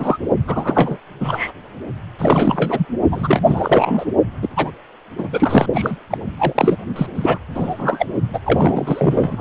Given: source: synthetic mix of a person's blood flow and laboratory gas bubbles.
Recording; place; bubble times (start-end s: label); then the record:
Doppler ultrasound of blood flow; precordium
0.00-0.18 s: bubbles
0.48-0.98 s: bubbles
1.20-1.52 s: bubbles
2.19-2.85 s: bubbles
3.11-4.06 s: bubbles
4.42-4.48 s: bubbles
4.56-4.71 s: bubbles
5.18-5.29 s: bubbles
5.32-5.66 s: bubbles
5.73-5.96 s: bubbles
6.10-6.18 s: bubbles
6.39-6.78 s: bubbles
6.96-7.07 s: bubbles
7.15-7.39 s: bubbles
7.54-8.06 s: bubbles
8.33-8.40 s: bubbles
8.45-9.41 s: bubbles
From the record:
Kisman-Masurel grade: 343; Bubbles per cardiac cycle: rolling drumbeat, 9 or more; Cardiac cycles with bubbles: 100%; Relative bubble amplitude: loud (0.450 to 0.775); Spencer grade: 3 (all of the cardiac periods contain showers or single bubble signals, but not dominating or overriding the cardiac motion signals); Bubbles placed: only in the low amplitude regions of the cardiac cycle